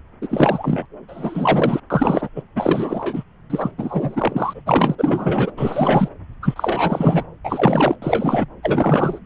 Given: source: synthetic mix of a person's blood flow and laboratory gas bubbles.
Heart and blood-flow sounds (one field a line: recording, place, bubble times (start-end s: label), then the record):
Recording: Doppler ultrasound of blood flow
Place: subclavian vein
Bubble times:
0.21-0.86 s: bubbles
1.08-1.80 s: bubbles
1.90-2.29 s: bubbles
2.36-2.42 s: bubbles
2.55-3.23 s: bubbles
3.50-3.71 s: bubbles
3.78-4.61 s: bubbles
4.66-4.95 s: bubbles
4.98-5.51 s: bubbles
5.57-6.08 s: bubbles
6.42-7.24 s: bubbles
7.45-7.96 s: bubbles
8.02-8.46 s: bubbles
8.63-9.19 s: bubbles
From the record:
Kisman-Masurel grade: 343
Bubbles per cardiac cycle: rolling drumbeat, 9 or more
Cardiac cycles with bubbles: 100%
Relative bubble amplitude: loud (0.450 to 0.775)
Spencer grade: 3 (all of the cardiac periods contain showers or single bubble signals, but not dominating or overriding the cardiac motion signals)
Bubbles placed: anywhere in the cardiac cycle